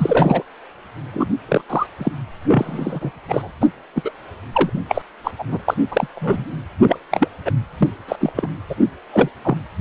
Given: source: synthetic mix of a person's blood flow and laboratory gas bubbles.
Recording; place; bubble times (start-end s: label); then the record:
Doppler ultrasound of blood flow; precordium
0.00-0.42 s: bubbles
1.14-1.30 s: bubbles
1.48-1.61 s: bubbles
1.70-1.87 s: bubbles
1.98-2.12 s: bubbles
2.47-3.11 s: bubbles
3.29-3.52 s: bubbles
3.61-3.68 s: bubbles
3.95-4.11 s: bubbles
4.52-4.69 s: bubbles
4.88-5.01 s: bubbles
5.23-5.31 s: bubbles
5.38-5.44 s: bubbles
5.48-5.57 s: bubbles
5.65-5.74 s: bubbles
5.91-6.07 s: bubbles
6.15-6.44 s: bubbles
6.82-6.97 s: bubbles
7.11-7.29 s: bubbles
7.45-7.51 s: bubbles
7.78-7.89 s: bubbles
8.08-8.16 s: bubbles
8.21-8.32 s: bubbles
8.35-8.47 s: bubbles
8.70-8.75 s: bubbles
9.13-9.29 s: bubbles
9.44-9.56 s: bubbles
9.79-9.81 s: bubbles
From the record:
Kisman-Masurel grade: 243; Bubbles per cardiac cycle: several, 3 to 8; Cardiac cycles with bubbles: 100%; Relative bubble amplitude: loud (0.450 to 0.775); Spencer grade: 3 (all of the cardiac periods contain showers or single bubble signals, but not dominating or overriding the cardiac motion signals); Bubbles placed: anywhere in the cardiac cycle